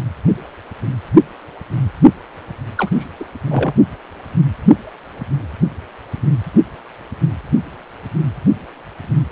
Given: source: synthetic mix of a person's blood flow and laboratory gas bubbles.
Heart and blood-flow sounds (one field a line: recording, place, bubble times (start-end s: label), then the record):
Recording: Doppler ultrasound of blood flow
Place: precordium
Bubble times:
2.77-2.92 s: bubbles
2.94-3.08 s: bubbles
3.19-3.24 s: bubbles
3.47-3.73 s: bubbles
From the record:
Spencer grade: 1 (occasional bubble signal discernible with the cardiac motion signal, with majority of cardiac periods free of bubbles)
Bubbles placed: only in the low amplitude regions of the cardiac cycle